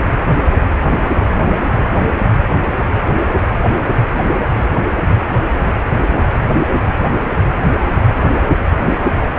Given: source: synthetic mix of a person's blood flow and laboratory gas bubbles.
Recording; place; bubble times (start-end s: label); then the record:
Doppler ultrasound of blood flow; precordium
7.12-7.21 s: bubbles
8.09-8.26 s: bubbles
From the record:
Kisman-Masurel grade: 122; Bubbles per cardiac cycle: 1 to 2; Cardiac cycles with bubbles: 10 to 50%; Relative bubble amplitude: moderate (0.250 to 0.450); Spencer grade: 2 (many but less than half of the cardiac periods contain bubble signals, singularly or in groups); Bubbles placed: anywhere in the cardiac cycle